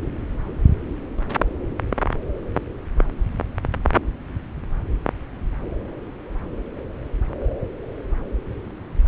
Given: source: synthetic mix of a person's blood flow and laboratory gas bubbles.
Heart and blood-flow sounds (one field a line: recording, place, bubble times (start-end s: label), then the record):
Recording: Doppler ultrasound of blood flow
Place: subclavian vein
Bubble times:
no bubbles
From the record:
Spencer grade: 0 (complete lack of bubble signals)